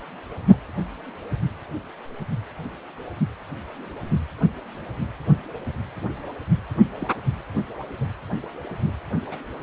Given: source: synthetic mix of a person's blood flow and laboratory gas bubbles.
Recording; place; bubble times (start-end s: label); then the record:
Doppler ultrasound of blood flow; precordium
0.53-0.57 s: bubbles
7.00-7.08 s: bubbles
8.01-8.05 s: bubbles
8.69-8.95 s: bubbles
9.31-9.37 s: bubbles
From the record:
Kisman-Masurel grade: 121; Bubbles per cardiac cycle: 1 to 2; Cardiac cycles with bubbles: 10 to 50%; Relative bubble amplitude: barely perceptible (0.100 to 0.250); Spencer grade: 2 (many but less than half of the cardiac periods contain bubble signals, singularly or in groups); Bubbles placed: anywhere in the cardiac cycle